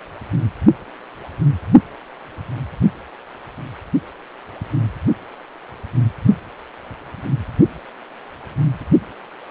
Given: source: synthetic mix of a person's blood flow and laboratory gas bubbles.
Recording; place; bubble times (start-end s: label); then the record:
Doppler ultrasound of blood flow; precordium
no bubbles
From the record:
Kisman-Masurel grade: 000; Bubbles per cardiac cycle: 0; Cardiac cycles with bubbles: 0%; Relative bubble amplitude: no bubbles discernible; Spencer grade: 0 (complete lack of bubble signals)